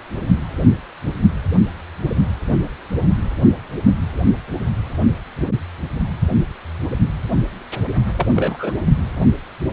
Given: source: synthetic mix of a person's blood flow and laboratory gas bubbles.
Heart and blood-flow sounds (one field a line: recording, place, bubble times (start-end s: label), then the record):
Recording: Doppler ultrasound of blood flow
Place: precordium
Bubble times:
8.17-8.27 s: bubbles
8.35-8.73 s: bubbles
From the record:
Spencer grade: 1 (occasional bubble signal discernible with the cardiac motion signal, with majority of cardiac periods free of bubbles)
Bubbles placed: only in the low amplitude regions of the cardiac cycle